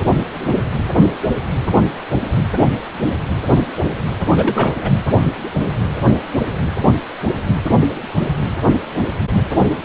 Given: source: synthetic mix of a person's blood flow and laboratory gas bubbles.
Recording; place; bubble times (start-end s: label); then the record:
Doppler ultrasound of blood flow; precordium
4.34-4.73 s: bubbles
4.81-4.90 s: bubbles
From the record:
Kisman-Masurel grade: 212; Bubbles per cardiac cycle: several, 3 to 8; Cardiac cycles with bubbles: 1 to 10%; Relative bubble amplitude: moderate (0.250 to 0.450); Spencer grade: 1 (occasional bubble signal discernible with the cardiac motion signal, with majority of cardiac periods free of bubbles); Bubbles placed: anywhere in the cardiac cycle